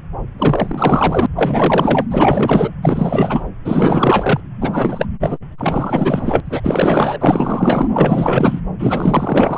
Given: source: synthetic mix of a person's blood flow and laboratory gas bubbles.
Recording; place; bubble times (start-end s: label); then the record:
Doppler ultrasound of blood flow; subclavian vein
0.38-1.26 s: bubbles
1.36-2.06 s: bubbles
2.10-2.71 s: bubbles
2.82-3.44 s: bubbles
3.65-4.41 s: bubbles
4.61-5.06 s: bubbles
5.20-5.38 s: bubbles
5.58-6.41 s: bubbles
6.46-7.88 s: bubbles
7.93-8.60 s: bubbles
8.78-9.58 s: bubbles
From the record:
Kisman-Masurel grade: 444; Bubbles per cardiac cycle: continuous sound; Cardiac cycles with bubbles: 100%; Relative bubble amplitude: maximal (0.775 to 0.999); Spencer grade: 4 (maximum detectable bubble signal sounding continuously throughout systole and diastole of every cardiac period, and overriding the amplitude of the normal cardiac signals); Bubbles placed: anywhere in the cardiac cycle